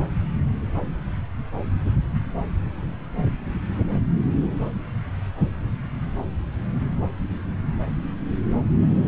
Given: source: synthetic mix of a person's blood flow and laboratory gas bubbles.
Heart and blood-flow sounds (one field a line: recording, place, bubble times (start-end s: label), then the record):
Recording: Doppler ultrasound of blood flow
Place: subclavian vein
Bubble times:
no bubbles
From the record:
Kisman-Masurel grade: 000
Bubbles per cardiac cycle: 0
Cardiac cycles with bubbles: 0%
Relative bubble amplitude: no bubbles discernible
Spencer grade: 0 (complete lack of bubble signals)